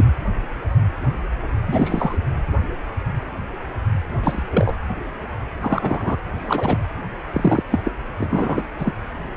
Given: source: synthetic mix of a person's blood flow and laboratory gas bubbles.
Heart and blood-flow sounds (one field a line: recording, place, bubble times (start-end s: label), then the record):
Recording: Doppler ultrasound of blood flow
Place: precordium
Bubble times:
0.00-0.05 s: bubbles
1.68-2.18 s: bubbles
4.23-4.42 s: bubbles
4.52-4.75 s: bubbles
5.62-6.17 s: bubbles
6.37-6.85 s: bubbles
7.33-7.63 s: bubbles
7.71-7.79 s: bubbles
7.83-7.92 s: bubbles
8.18-8.64 s: bubbles
8.79-8.94 s: bubbles
From the record:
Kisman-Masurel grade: 232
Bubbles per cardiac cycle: several, 3 to 8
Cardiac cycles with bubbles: 50 to 99%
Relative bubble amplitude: moderate (0.250 to 0.450)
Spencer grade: 3 (all of the cardiac periods contain showers or single bubble signals, but not dominating or overriding the cardiac motion signals)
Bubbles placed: anywhere in the cardiac cycle